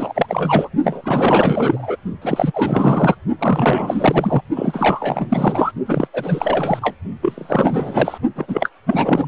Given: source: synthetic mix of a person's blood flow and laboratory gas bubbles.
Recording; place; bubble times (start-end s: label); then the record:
Doppler ultrasound of blood flow; precordium
0.00-0.69 s: bubbles
0.83-1.97 s: bubbles
2.21-3.16 s: bubbles
3.38-4.42 s: bubbles
4.55-5.72 s: bubbles
5.85-6.08 s: bubbles
6.13-6.95 s: bubbles
7.21-8.18 s: bubbles
8.36-8.70 s: bubbles
8.86-9.28 s: bubbles
From the record:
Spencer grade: 4 (maximum detectable bubble signal sounding continuously throughout systole and diastole of every cardiac period, and overriding the amplitude of the normal cardiac signals); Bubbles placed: only in the low amplitude regions of the cardiac cycle